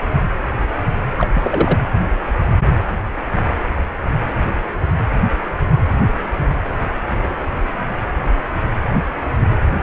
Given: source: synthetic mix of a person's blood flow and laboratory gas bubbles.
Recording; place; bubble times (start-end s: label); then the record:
Doppler ultrasound of blood flow; precordium
1.17-1.28 s: bubbles
1.33-1.80 s: bubbles
From the record:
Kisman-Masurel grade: 223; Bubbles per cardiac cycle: several, 3 to 8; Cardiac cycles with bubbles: 10 to 50%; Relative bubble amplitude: loud (0.450 to 0.775); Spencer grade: 2 (many but less than half of the cardiac periods contain bubble signals, singularly or in groups); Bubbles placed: anywhere in the cardiac cycle